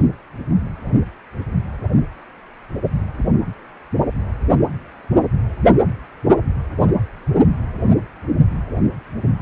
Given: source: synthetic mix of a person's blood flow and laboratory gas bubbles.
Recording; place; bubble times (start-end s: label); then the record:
Doppler ultrasound of blood flow; precordium
0.00-0.02 s: bubbles
3.18-3.30 s: bubbles
From the record:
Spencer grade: 2 (many but less than half of the cardiac periods contain bubble signals, singularly or in groups); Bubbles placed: only in the low amplitude regions of the cardiac cycle